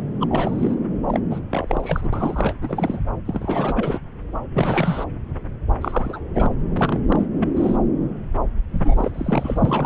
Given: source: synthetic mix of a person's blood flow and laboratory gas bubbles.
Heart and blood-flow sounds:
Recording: Doppler ultrasound of blood flow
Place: subclavian vein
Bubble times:
0.20-0.74 s: bubbles
1.08-1.20 s: bubbles
1.31-1.39 s: bubbles
1.50-2.10 s: bubbles
2.12-2.53 s: bubbles
2.61-3.01 s: bubbles
3.25-4.00 s: bubbles
4.53-5.05 s: bubbles
5.81-6.19 s: bubbles
6.33-6.50 s: bubbles
6.73-7.00 s: bubbles
7.08-7.25 s: bubbles
7.40-7.48 s: bubbles
7.56-7.77 s: bubbles
8.69-9.12 s: bubbles
9.14-9.86 s: bubbles
From the record:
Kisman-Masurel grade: 332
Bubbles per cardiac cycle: rolling drumbeat, 9 or more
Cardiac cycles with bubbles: 50 to 99%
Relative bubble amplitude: moderate (0.250 to 0.450)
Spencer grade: 3 (all of the cardiac periods contain showers or single bubble signals, but not dominating or overriding the cardiac motion signals)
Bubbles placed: anywhere in the cardiac cycle

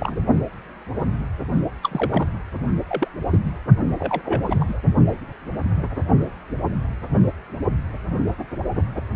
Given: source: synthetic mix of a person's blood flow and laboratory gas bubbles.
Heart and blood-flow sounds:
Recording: Doppler ultrasound of blood flow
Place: precordium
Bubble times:
0.00-0.18 s: bubbles
1.83-2.27 s: bubbles
2.89-3.08 s: bubbles
3.30-3.39 s: bubbles
3.45-3.52 s: bubbles
3.98-4.21 s: bubbles
4.25-4.42 s: bubbles
4.46-4.78 s: bubbles
From the record:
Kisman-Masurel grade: 222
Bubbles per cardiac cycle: several, 3 to 8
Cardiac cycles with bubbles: 10 to 50%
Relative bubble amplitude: moderate (0.250 to 0.450)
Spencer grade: 2 (many but less than half of the cardiac periods contain bubble signals, singularly or in groups)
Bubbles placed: only in the low amplitude regions of the cardiac cycle

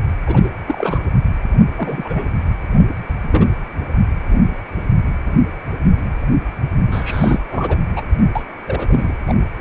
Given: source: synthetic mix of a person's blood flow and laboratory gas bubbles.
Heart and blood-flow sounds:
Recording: Doppler ultrasound of blood flow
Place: precordium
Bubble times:
0.26-0.50 s: bubbles
0.66-0.99 s: bubbles
1.77-2.28 s: bubbles
3.23-3.29 s: bubbles
3.31-3.46 s: bubbles
6.87-7.41 s: bubbles
7.50-7.78 s: bubbles
7.96-8.02 s: bubbles
8.35-8.42 s: bubbles
8.67-9.12 s: bubbles
9.27-9.34 s: bubbles
9.57-9.61 s: bubbles
From the record:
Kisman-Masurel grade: 232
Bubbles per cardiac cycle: several, 3 to 8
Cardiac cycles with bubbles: 50 to 99%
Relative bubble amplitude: moderate (0.250 to 0.450)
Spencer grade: 3 (all of the cardiac periods contain showers or single bubble signals, but not dominating or overriding the cardiac motion signals)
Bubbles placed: anywhere in the cardiac cycle

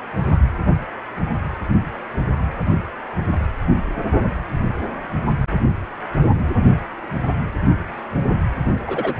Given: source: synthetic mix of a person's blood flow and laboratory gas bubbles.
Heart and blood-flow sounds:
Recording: Doppler ultrasound of blood flow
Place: precordium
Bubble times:
8.86-9.14 s: bubbles
From the record:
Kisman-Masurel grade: 112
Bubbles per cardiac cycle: 1 to 2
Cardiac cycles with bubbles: 1 to 10%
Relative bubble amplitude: moderate (0.250 to 0.450)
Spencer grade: 1 (occasional bubble signal discernible with the cardiac motion signal, with majority of cardiac periods free of bubbles)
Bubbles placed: anywhere in the cardiac cycle

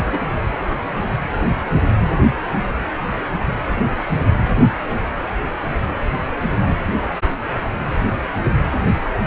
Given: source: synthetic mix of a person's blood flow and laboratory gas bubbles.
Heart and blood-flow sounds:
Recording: Doppler ultrasound of blood flow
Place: precordium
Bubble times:
0.04-0.21 s: bubbles
From the record:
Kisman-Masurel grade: 211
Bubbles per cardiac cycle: several, 3 to 8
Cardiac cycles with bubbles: 1 to 10%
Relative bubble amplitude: barely perceptible (0.100 to 0.250)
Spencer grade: 1 (occasional bubble signal discernible with the cardiac motion signal, with majority of cardiac periods free of bubbles)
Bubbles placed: anywhere in the cardiac cycle

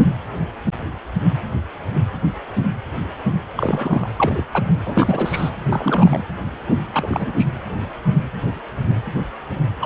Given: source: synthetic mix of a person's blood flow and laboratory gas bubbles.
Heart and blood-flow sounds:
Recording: Doppler ultrasound of blood flow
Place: precordium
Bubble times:
3.57-4.09 s: bubbles
4.19-4.44 s: bubbles
4.52-4.62 s: bubbles
4.86-5.51 s: bubbles
5.70-6.22 s: bubbles
6.93-7.33 s: bubbles
7.37-7.46 s: bubbles
9.80-9.86 s: bubbles
From the record:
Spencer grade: 2 (many but less than half of the cardiac periods contain bubble signals, singularly or in groups)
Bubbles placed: anywhere in the cardiac cycle

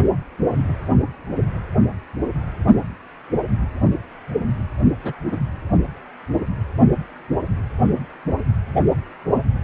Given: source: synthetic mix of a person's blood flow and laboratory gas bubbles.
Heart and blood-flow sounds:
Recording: Doppler ultrasound of blood flow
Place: precordium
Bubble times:
5.03-5.13 s: bubbles
5.31-5.40 s: bubbles
From the record:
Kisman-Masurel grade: 112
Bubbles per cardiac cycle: 1 to 2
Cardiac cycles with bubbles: 1 to 10%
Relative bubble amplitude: moderate (0.250 to 0.450)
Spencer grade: 1 (occasional bubble signal discernible with the cardiac motion signal, with majority of cardiac periods free of bubbles)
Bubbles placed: only in the low amplitude regions of the cardiac cycle

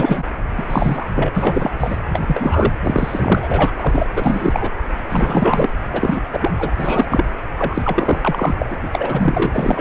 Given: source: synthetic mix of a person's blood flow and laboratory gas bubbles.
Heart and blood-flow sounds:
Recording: Doppler ultrasound of blood flow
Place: precordium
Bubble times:
0.00-0.24 s: bubbles
0.57-1.07 s: bubbles
1.15-1.31 s: bubbles
1.34-1.70 s: bubbles
1.79-1.97 s: bubbles
2.13-2.21 s: bubbles
2.27-2.73 s: bubbles
2.83-3.71 s: bubbles
3.78-4.08 s: bubbles
4.16-4.70 s: bubbles
5.09-5.70 s: bubbles
5.93-6.21 s: bubbles
6.32-6.50 s: bubbles
6.58-6.72 s: bubbles
6.79-7.25 s: bubbles
7.58-8.19 s: bubbles
8.21-8.54 s: bubbles
8.59-8.66 s: bubbles
8.70-8.77 s: bubbles
8.82-8.89 s: bubbles
8.92-9.52 s: bubbles
9.55-9.81 s: bubbles
From the record:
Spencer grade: 3 (all of the cardiac periods contain showers or single bubble signals, but not dominating or overriding the cardiac motion signals)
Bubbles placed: anywhere in the cardiac cycle

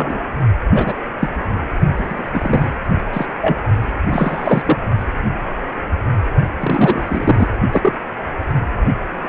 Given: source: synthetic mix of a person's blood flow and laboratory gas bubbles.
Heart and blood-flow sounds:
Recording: Doppler ultrasound of blood flow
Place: precordium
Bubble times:
0.00-0.18 s: bubbles
0.74-0.93 s: bubbles
1.20-1.29 s: bubbles
1.97-2.73 s: bubbles
3.13-3.26 s: bubbles
3.41-3.57 s: bubbles
4.10-4.63 s: bubbles
4.65-4.77 s: bubbles
6.56-7.47 s: bubbles
7.72-7.93 s: bubbles
From the record:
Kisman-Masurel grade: 233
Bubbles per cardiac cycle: several, 3 to 8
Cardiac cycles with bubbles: 50 to 99%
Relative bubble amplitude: loud (0.450 to 0.775)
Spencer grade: 3 (all of the cardiac periods contain showers or single bubble signals, but not dominating or overriding the cardiac motion signals)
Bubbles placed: only in the low amplitude regions of the cardiac cycle

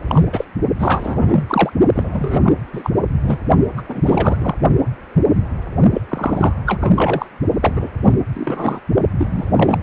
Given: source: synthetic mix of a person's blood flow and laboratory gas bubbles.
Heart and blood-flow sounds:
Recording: Doppler ultrasound of blood flow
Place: precordium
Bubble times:
0.06-0.28 s: bubbles
0.32-0.45 s: bubbles
0.79-1.45 s: bubbles
1.48-1.70 s: bubbles
1.95-2.55 s: bubbles
2.73-2.91 s: bubbles
3.24-3.39 s: bubbles
3.77-3.83 s: bubbles
3.88-4.01 s: bubbles
4.05-4.37 s: bubbles
4.40-4.55 s: bubbles
5.94-6.01 s: bubbles
6.08-6.53 s: bubbles
6.66-7.26 s: bubbles
7.61-7.90 s: bubbles
8.02-8.13 s: bubbles
8.34-8.80 s: bubbles
9.17-9.79 s: bubbles
From the record:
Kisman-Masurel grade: 333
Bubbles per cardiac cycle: rolling drumbeat, 9 or more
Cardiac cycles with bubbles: 50 to 99%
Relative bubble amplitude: loud (0.450 to 0.775)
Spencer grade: 3 (all of the cardiac periods contain showers or single bubble signals, but not dominating or overriding the cardiac motion signals)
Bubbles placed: only in the low amplitude regions of the cardiac cycle

